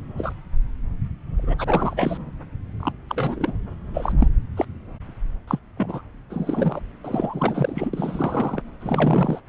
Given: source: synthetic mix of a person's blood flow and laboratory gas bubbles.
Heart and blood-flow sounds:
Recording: Doppler ultrasound of blood flow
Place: subclavian vein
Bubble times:
0.17-0.33 s: bubbles
1.38-1.56 s: bubbles
1.58-2.17 s: bubbles
2.79-2.92 s: bubbles
3.09-3.52 s: bubbles
3.94-4.12 s: bubbles
4.19-4.28 s: bubbles
4.57-4.65 s: bubbles
5.47-5.59 s: bubbles
5.77-6.01 s: bubbles
6.30-6.81 s: bubbles
7.04-7.91 s: bubbles
7.93-8.62 s: bubbles
8.80-9.41 s: bubbles
From the record:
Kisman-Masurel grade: 242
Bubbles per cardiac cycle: several, 3 to 8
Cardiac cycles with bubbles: 100%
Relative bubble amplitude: moderate (0.250 to 0.450)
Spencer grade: 3 (all of the cardiac periods contain showers or single bubble signals, but not dominating or overriding the cardiac motion signals)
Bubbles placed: anywhere in the cardiac cycle

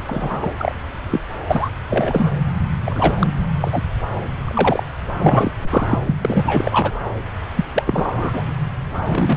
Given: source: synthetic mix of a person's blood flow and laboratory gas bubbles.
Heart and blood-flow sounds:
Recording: Doppler ultrasound of blood flow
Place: subclavian vein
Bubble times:
0.07-0.53 s: bubbles
0.58-0.73 s: bubbles
1.10-1.20 s: bubbles
1.47-1.70 s: bubbles
1.89-2.32 s: bubbles
2.85-3.27 s: bubbles
3.60-3.82 s: bubbles
4.45-4.85 s: bubbles
5.17-5.50 s: bubbles
5.56-5.99 s: bubbles
6.06-6.15 s: bubbles
6.25-6.95 s: bubbles
7.55-7.64 s: bubbles
7.75-7.83 s: bubbles
7.86-8.43 s: bubbles
9.05-9.36 s: bubbles
From the record:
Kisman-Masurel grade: 243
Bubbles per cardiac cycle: several, 3 to 8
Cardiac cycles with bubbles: 100%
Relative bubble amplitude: loud (0.450 to 0.775)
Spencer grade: 3 (all of the cardiac periods contain showers or single bubble signals, but not dominating or overriding the cardiac motion signals)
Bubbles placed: anywhere in the cardiac cycle

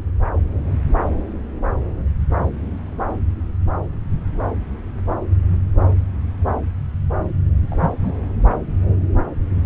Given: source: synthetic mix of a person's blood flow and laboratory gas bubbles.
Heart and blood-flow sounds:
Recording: Doppler ultrasound of blood flow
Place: subclavian vein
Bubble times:
7.70-7.91 s: bubbles
7.99-8.12 s: bubbles
From the record:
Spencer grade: 1 (occasional bubble signal discernible with the cardiac motion signal, with majority of cardiac periods free of bubbles)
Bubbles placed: anywhere in the cardiac cycle

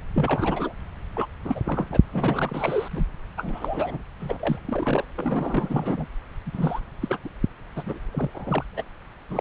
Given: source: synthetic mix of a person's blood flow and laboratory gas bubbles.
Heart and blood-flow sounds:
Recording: Doppler ultrasound of blood flow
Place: subclavian vein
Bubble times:
0.14-0.73 s: bubbles
1.14-1.26 s: bubbles
1.45-1.87 s: bubbles
1.92-1.99 s: bubbles
2.12-2.88 s: bubbles
2.92-3.05 s: bubbles
3.37-4.02 s: bubbles
4.19-4.61 s: bubbles
4.65-5.08 s: bubbles
5.14-6.06 s: bubbles
6.46-6.80 s: bubbles
7.00-7.18 s: bubbles
7.25-7.29 s: bubbles
7.75-8.00 s: bubbles
8.12-8.30 s: bubbles
8.34-8.65 s: bubbles
8.76-8.83 s: bubbles
9.29-9.41 s: bubbles
From the record:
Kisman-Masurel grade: 342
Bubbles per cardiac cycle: rolling drumbeat, 9 or more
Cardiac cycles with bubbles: 100%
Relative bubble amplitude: moderate (0.250 to 0.450)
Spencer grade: 3 (all of the cardiac periods contain showers or single bubble signals, but not dominating or overriding the cardiac motion signals)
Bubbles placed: anywhere in the cardiac cycle

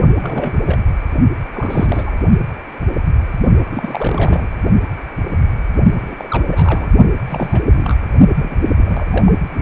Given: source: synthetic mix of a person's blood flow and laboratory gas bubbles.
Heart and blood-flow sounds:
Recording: Doppler ultrasound of blood flow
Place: precordium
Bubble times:
0.17-0.59 s: bubbles
0.67-0.77 s: bubbles
1.53-2.13 s: bubbles
3.66-4.47 s: bubbles
5.98-6.27 s: bubbles
6.30-6.44 s: bubbles
6.47-6.90 s: bubbles
7.27-7.62 s: bubbles
7.73-7.99 s: bubbles
8.37-8.56 s: bubbles
8.66-8.74 s: bubbles
8.77-9.06 s: bubbles
9.11-9.31 s: bubbles
9.51-9.61 s: bubbles
From the record:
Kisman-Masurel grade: 332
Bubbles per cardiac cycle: rolling drumbeat, 9 or more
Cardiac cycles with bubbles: 50 to 99%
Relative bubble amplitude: moderate (0.250 to 0.450)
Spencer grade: 3 (all of the cardiac periods contain showers or single bubble signals, but not dominating or overriding the cardiac motion signals)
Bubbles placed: only in the low amplitude regions of the cardiac cycle

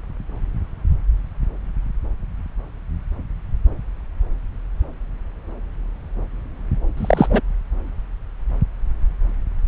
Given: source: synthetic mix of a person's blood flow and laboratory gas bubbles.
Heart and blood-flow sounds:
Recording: Doppler ultrasound of blood flow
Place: subclavian vein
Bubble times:
6.97-7.41 s: bubbles
From the record:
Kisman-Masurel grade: 213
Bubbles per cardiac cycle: several, 3 to 8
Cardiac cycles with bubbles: 1 to 10%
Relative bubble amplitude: loud (0.450 to 0.775)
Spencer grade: 1 (occasional bubble signal discernible with the cardiac motion signal, with majority of cardiac periods free of bubbles)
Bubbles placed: anywhere in the cardiac cycle

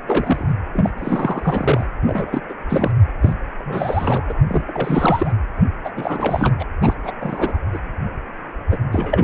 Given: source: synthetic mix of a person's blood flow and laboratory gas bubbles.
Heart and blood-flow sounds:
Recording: Doppler ultrasound of blood flow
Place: precordium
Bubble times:
0.07-0.55 s: bubbles
0.73-0.91 s: bubbles
0.98-1.86 s: bubbles
2.02-2.41 s: bubbles
2.49-2.54 s: bubbles
2.69-2.92 s: bubbles
3.21-3.35 s: bubbles
3.59-4.45 s: bubbles
4.48-4.63 s: bubbles
4.67-5.33 s: bubbles
5.84-5.90 s: bubbles
5.96-6.55 s: bubbles
6.59-6.65 s: bubbles
6.80-6.96 s: bubbles
7.04-7.13 s: bubbles
7.20-7.58 s: bubbles
7.72-7.79 s: bubbles
8.71-8.77 s: bubbles
8.92-9.24 s: bubbles
From the record:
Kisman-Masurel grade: 343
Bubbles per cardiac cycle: rolling drumbeat, 9 or more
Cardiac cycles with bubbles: 100%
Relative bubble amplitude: loud (0.450 to 0.775)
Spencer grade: 3 (all of the cardiac periods contain showers or single bubble signals, but not dominating or overriding the cardiac motion signals)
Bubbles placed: anywhere in the cardiac cycle

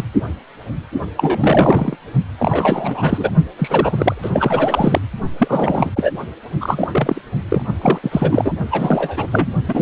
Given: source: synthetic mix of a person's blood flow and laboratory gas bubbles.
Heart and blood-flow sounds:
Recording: Doppler ultrasound of blood flow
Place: precordium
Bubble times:
0.00-0.07 s: bubbles
1.17-1.96 s: bubbles
2.38-3.30 s: bubbles
3.58-4.30 s: bubbles
4.33-5.01 s: bubbles
5.39-5.92 s: bubbles
5.96-6.12 s: bubbles
6.61-7.22 s: bubbles
7.49-7.62 s: bubbles
7.82-7.99 s: bubbles
8.03-8.54 s: bubbles
8.71-9.26 s: bubbles
9.31-9.48 s: bubbles
9.68-9.82 s: bubbles
From the record:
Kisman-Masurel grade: 333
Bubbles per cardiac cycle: rolling drumbeat, 9 or more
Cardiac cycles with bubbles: 50 to 99%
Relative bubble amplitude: loud (0.450 to 0.775)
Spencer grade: 3 (all of the cardiac periods contain showers or single bubble signals, but not dominating or overriding the cardiac motion signals)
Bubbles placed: only in the low amplitude regions of the cardiac cycle

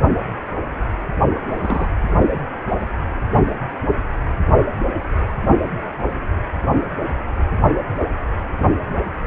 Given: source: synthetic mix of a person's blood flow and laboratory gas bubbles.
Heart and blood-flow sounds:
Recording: Doppler ultrasound of blood flow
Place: precordium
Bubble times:
1.35-1.39 s: bubbles
1.48-1.91 s: bubbles
From the record:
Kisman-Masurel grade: 212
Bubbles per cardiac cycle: several, 3 to 8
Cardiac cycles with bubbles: 1 to 10%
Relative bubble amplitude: moderate (0.250 to 0.450)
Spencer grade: 1 (occasional bubble signal discernible with the cardiac motion signal, with majority of cardiac periods free of bubbles)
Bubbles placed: only in the low amplitude regions of the cardiac cycle

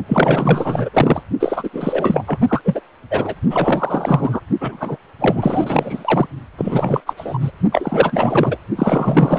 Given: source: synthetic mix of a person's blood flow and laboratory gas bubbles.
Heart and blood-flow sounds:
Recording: Doppler ultrasound of blood flow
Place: precordium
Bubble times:
0.08-0.89 s: bubbles
0.93-1.22 s: bubbles
1.40-1.70 s: bubbles
1.73-2.23 s: bubbles
2.27-2.38 s: bubbles
2.47-2.61 s: bubbles
2.64-2.80 s: bubbles
3.10-3.34 s: bubbles
3.50-4.40 s: bubbles
4.60-4.97 s: bubbles
5.19-6.27 s: bubbles
6.58-7.00 s: bubbles
7.06-7.13 s: bubbles
7.17-7.50 s: bubbles
7.71-8.57 s: bubbles
8.76-9.39 s: bubbles
From the record:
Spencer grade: 4 (maximum detectable bubble signal sounding continuously throughout systole and diastole of every cardiac period, and overriding the amplitude of the normal cardiac signals)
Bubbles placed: only in the low amplitude regions of the cardiac cycle

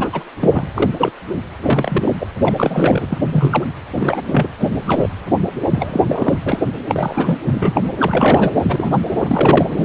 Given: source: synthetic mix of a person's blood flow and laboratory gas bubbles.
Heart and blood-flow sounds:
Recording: Doppler ultrasound of blood flow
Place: precordium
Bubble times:
0.00-0.09 s: bubbles
0.12-0.24 s: bubbles
0.41-0.67 s: bubbles
0.77-0.91 s: bubbles
0.98-1.11 s: bubbles
1.61-2.12 s: bubbles
2.21-2.27 s: bubbles
2.42-3.07 s: bubbles
3.10-3.18 s: bubbles
3.31-3.67 s: bubbles
3.93-4.21 s: bubbles
4.29-4.49 s: bubbles
4.59-4.67 s: bubbles
4.82-5.09 s: bubbles
5.69-6.38 s: bubbles
6.46-6.65 s: bubbles
6.88-7.38 s: bubbles
7.44-7.81 s: bubbles
7.99-8.97 s: bubbles
9.16-9.72 s: bubbles
9.76-9.85 s: bubbles
From the record:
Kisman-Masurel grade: 243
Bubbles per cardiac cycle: several, 3 to 8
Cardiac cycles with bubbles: 100%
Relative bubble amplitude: loud (0.450 to 0.775)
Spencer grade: 3 (all of the cardiac periods contain showers or single bubble signals, but not dominating or overriding the cardiac motion signals)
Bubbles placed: anywhere in the cardiac cycle

